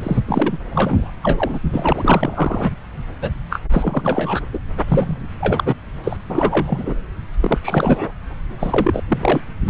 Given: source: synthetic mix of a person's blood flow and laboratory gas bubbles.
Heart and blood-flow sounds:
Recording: Doppler ultrasound of blood flow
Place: subclavian vein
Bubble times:
0.00-0.20 s: bubbles
0.28-0.58 s: bubbles
0.70-1.10 s: bubbles
1.23-1.58 s: bubbles
1.73-2.71 s: bubbles
3.21-3.31 s: bubbles
3.50-3.61 s: bubbles
3.71-4.40 s: bubbles
4.53-4.59 s: bubbles
4.87-5.18 s: bubbles
5.40-5.74 s: bubbles
6.04-6.16 s: bubbles
6.29-6.94 s: bubbles
7.40-7.58 s: bubbles
7.62-8.13 s: bubbles
8.59-9.03 s: bubbles
9.09-9.41 s: bubbles
9.66-9.70 s: bubbles
From the record:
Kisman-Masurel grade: 342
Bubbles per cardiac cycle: rolling drumbeat, 9 or more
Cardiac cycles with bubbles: 100%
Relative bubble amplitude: moderate (0.250 to 0.450)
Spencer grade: 3 (all of the cardiac periods contain showers or single bubble signals, but not dominating or overriding the cardiac motion signals)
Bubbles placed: anywhere in the cardiac cycle

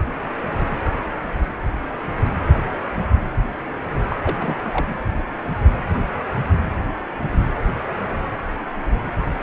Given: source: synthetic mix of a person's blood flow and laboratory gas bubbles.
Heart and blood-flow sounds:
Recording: Doppler ultrasound of blood flow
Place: precordium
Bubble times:
4.08-4.16 s: bubbles
4.23-4.55 s: bubbles
4.72-4.94 s: bubbles
From the record:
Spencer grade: 1 (occasional bubble signal discernible with the cardiac motion signal, with majority of cardiac periods free of bubbles)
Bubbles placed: anywhere in the cardiac cycle

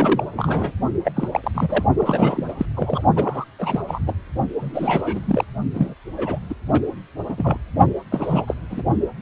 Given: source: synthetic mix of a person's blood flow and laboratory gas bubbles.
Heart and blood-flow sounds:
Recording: Doppler ultrasound of blood flow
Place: precordium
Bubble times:
0.00-0.25 s: bubbles
0.33-0.73 s: bubbles
1.04-1.11 s: bubbles
1.16-1.28 s: bubbles
1.32-1.40 s: bubbles
1.43-1.51 s: bubbles
1.54-1.85 s: bubbles
1.97-2.54 s: bubbles
2.58-2.66 s: bubbles
2.75-3.03 s: bubbles
3.16-3.45 s: bubbles
3.58-3.83 s: bubbles
3.88-4.00 s: bubbles
4.07-4.14 s: bubbles
4.60-5.45 s: bubbles
5.74-5.95 s: bubbles
6.17-6.40 s: bubbles
6.49-6.54 s: bubbles
6.69-6.81 s: bubbles
7.29-7.58 s: bubbles
8.11-8.54 s: bubbles
8.70-8.83 s: bubbles
From the record:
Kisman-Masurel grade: 342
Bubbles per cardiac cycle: rolling drumbeat, 9 or more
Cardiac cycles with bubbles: 100%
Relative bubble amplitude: moderate (0.250 to 0.450)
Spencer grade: 3 (all of the cardiac periods contain showers or single bubble signals, but not dominating or overriding the cardiac motion signals)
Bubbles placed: only in the low amplitude regions of the cardiac cycle

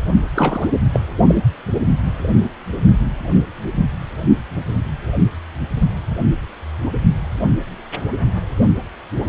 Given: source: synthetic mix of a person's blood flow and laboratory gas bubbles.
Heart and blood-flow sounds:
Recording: Doppler ultrasound of blood flow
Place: precordium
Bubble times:
0.35-0.68 s: bubbles
0.94-1.00 s: bubbles
1.22-1.43 s: bubbles
From the record:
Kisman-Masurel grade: 212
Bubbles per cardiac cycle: several, 3 to 8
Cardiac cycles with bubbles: 1 to 10%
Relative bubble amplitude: moderate (0.250 to 0.450)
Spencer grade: 1 (occasional bubble signal discernible with the cardiac motion signal, with majority of cardiac periods free of bubbles)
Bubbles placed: only in the low amplitude regions of the cardiac cycle

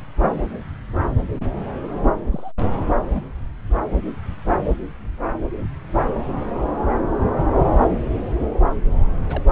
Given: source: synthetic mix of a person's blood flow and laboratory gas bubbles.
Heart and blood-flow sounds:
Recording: Doppler ultrasound of blood flow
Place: subclavian vein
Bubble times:
2.21-2.27 s: bubbles
2.31-2.52 s: bubbles
3.13-3.24 s: bubbles
9.29-9.44 s: bubbles
From the record:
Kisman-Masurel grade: 121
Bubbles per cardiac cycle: 1 to 2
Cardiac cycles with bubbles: 10 to 50%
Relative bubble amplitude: barely perceptible (0.100 to 0.250)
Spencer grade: 2 (many but less than half of the cardiac periods contain bubble signals, singularly or in groups)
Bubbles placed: anywhere in the cardiac cycle

